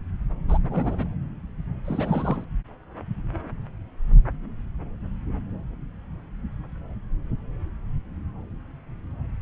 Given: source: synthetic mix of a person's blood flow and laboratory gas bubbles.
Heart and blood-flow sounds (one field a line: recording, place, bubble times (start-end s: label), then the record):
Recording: Doppler ultrasound of blood flow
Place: subclavian vein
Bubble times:
0.48-0.58 s: bubbles
0.69-1.08 s: bubbles
1.85-2.45 s: bubbles
From the record:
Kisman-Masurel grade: 221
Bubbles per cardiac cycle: several, 3 to 8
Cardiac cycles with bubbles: 10 to 50%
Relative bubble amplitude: barely perceptible (0.100 to 0.250)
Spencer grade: 2 (many but less than half of the cardiac periods contain bubble signals, singularly or in groups)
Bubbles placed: anywhere in the cardiac cycle